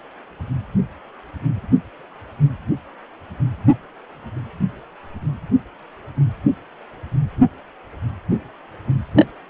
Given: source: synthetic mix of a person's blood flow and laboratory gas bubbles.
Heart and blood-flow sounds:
Doppler ultrasound of blood flow; precordium
9.15-9.26 s: bubbles
From the record:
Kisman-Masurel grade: 212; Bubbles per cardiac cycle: several, 3 to 8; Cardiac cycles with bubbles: 1 to 10%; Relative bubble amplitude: moderate (0.250 to 0.450); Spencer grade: 1 (occasional bubble signal discernible with the cardiac motion signal, with majority of cardiac periods free of bubbles); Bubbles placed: anywhere in the cardiac cycle

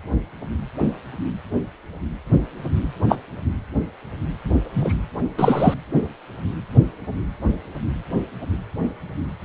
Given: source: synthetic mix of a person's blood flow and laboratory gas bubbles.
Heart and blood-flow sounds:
Doppler ultrasound of blood flow; precordium
3.08-3.17 s: bubbles
4.75-4.93 s: bubbles
5.37-5.74 s: bubbles
From the record:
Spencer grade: 2 (many but less than half of the cardiac periods contain bubble signals, singularly or in groups); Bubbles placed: anywhere in the cardiac cycle

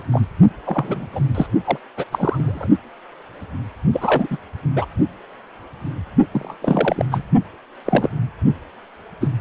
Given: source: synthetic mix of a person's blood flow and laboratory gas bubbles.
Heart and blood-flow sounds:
Doppler ultrasound of blood flow; precordium
0.00-0.03 s: bubbles
0.11-0.21 s: bubbles
0.65-1.06 s: bubbles
1.12-1.21 s: bubbles
1.34-1.46 s: bubbles
1.65-1.78 s: bubbles
1.97-2.04 s: bubbles
2.12-2.70 s: bubbles
3.92-4.27 s: bubbles
4.30-4.38 s: bubbles
4.75-4.86 s: bubbles
6.31-6.54 s: bubbles
6.62-7.05 s: bubbles
7.11-7.22 s: bubbles
7.86-8.08 s: bubbles
8.45-8.52 s: bubbles
9.20-9.28 s: bubbles
From the record:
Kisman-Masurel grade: 232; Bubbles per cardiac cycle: several, 3 to 8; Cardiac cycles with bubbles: 50 to 99%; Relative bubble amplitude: moderate (0.250 to 0.450); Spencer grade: 3 (all of the cardiac periods contain showers or single bubble signals, but not dominating or overriding the cardiac motion signals); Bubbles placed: only in the low amplitude regions of the cardiac cycle

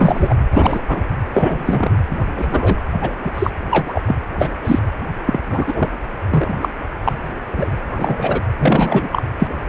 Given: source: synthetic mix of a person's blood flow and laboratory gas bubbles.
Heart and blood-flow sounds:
Doppler ultrasound of blood flow; precordium
0.00-0.35 s: bubbles
0.52-0.82 s: bubbles
0.88-1.04 s: bubbles
1.34-1.97 s: bubbles
2.10-2.17 s: bubbles
2.37-2.76 s: bubbles
3.00-3.16 s: bubbles
3.23-3.31 s: bubbles
3.35-3.50 s: bubbles
3.71-4.01 s: bubbles
4.08-4.16 s: bubbles
4.31-4.50 s: bubbles
4.65-4.79 s: bubbles
5.25-5.39 s: bubbles
5.46-5.89 s: bubbles
6.30-6.54 s: bubbles
6.61-6.69 s: bubbles
7.04-7.18 s: bubbles
7.25-7.29 s: bubbles
7.51-7.83 s: bubbles
7.89-8.41 s: bubbles
8.58-9.09 s: bubbles
9.12-9.23 s: bubbles
9.39-9.47 s: bubbles
From the record:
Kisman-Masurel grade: 243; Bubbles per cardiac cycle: several, 3 to 8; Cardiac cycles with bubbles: 100%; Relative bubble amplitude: loud (0.450 to 0.775); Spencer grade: 3 (all of the cardiac periods contain showers or single bubble signals, but not dominating or overriding the cardiac motion signals); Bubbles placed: anywhere in the cardiac cycle

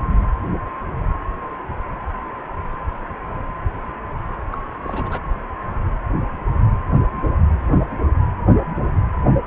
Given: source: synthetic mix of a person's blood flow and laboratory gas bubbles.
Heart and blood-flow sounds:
Doppler ultrasound of blood flow; precordium
4.51-4.56 s: bubbles
4.83-5.20 s: bubbles
From the record:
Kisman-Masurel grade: 211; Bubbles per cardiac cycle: several, 3 to 8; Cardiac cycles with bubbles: 1 to 10%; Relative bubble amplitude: barely perceptible (0.100 to 0.250); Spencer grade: 1 (occasional bubble signal discernible with the cardiac motion signal, with majority of cardiac periods free of bubbles); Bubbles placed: anywhere in the cardiac cycle

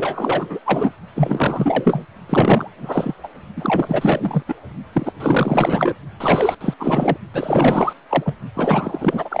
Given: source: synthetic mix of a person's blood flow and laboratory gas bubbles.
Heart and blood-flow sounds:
Doppler ultrasound of blood flow; precordium
0.00-0.60 s: bubbles
0.65-0.91 s: bubbles
1.15-2.05 s: bubbles
2.29-2.69 s: bubbles
2.77-3.15 s: bubbles
3.23-3.27 s: bubbles
3.56-4.42 s: bubbles
4.47-4.54 s: bubbles
4.93-5.12 s: bubbles
5.20-5.96 s: bubbles
6.20-6.55 s: bubbles
6.60-6.74 s: bubbles
6.79-7.17 s: bubbles
7.33-7.93 s: bubbles
8.09-8.34 s: bubbles
8.54-9.40 s: bubbles
From the record:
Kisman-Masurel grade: 444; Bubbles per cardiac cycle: continuous sound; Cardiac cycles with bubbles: 100%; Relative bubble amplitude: maximal (0.775 to 0.999); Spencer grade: 4 (maximum detectable bubble signal sounding continuously throughout systole and diastole of every cardiac period, and overriding the amplitude of the normal cardiac signals); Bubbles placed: only in the low amplitude regions of the cardiac cycle

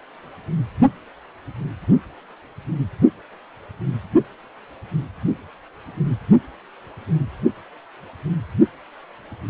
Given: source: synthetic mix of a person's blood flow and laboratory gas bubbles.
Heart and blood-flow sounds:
Doppler ultrasound of blood flow; precordium
no bubbles
From the record:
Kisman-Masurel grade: 000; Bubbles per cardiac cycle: 0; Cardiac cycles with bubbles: 0%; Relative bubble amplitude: no bubbles discernible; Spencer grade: 0 (complete lack of bubble signals)

